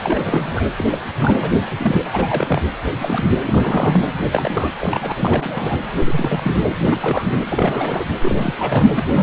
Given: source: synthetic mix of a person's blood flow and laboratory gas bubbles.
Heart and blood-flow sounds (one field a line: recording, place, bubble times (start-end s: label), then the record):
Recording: Doppler ultrasound of blood flow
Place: precordium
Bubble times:
0.00-0.69 s: bubbles
0.77-0.84 s: bubbles
0.90-0.98 s: bubbles
1.15-1.50 s: bubbles
1.77-2.01 s: bubbles
2.12-2.62 s: bubbles
2.86-3.24 s: bubbles
3.46-4.13 s: bubbles
4.31-4.69 s: bubbles
4.81-5.12 s: bubbles
5.14-5.80 s: bubbles
5.98-6.75 s: bubbles
6.84-7.38 s: bubbles
7.49-8.05 s: bubbles
8.21-8.55 s: bubbles
8.58-8.88 s: bubbles
8.95-9.23 s: bubbles
From the record:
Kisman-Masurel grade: 342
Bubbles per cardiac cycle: rolling drumbeat, 9 or more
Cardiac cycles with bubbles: 100%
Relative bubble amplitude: moderate (0.250 to 0.450)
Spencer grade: 3 (all of the cardiac periods contain showers or single bubble signals, but not dominating or overriding the cardiac motion signals)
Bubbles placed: anywhere in the cardiac cycle